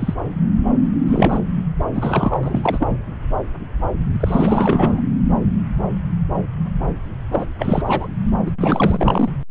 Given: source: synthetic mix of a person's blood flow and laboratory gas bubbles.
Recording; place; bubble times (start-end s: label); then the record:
Doppler ultrasound of blood flow; subclavian vein
0.00-0.14 s: bubbles
1.07-1.39 s: bubbles
1.92-2.40 s: bubbles
2.43-2.98 s: bubbles
4.20-5.01 s: bubbles
7.32-7.46 s: bubbles
7.59-7.83 s: bubbles
7.86-8.08 s: bubbles
8.46-8.51 s: bubbles
8.60-9.29 s: bubbles
From the record:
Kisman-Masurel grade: 332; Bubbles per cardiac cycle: rolling drumbeat, 9 or more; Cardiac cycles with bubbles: 50 to 99%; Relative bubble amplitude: moderate (0.250 to 0.450); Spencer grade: 3 (all of the cardiac periods contain showers or single bubble signals, but not dominating or overriding the cardiac motion signals); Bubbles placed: anywhere in the cardiac cycle